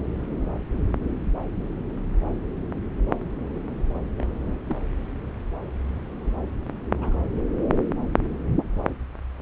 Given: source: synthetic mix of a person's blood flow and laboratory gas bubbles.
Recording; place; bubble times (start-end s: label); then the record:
Doppler ultrasound of blood flow; subclavian vein
4.18-4.36 s: bubbles
4.45-4.56 s: bubbles
4.67-4.77 s: bubbles
6.25-6.31 s: bubbles
6.95-7.21 s: bubbles
From the record:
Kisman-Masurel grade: 222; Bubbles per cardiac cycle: several, 3 to 8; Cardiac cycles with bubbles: 10 to 50%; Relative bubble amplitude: moderate (0.250 to 0.450); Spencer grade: 2 (many but less than half of the cardiac periods contain bubble signals, singularly or in groups); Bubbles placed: anywhere in the cardiac cycle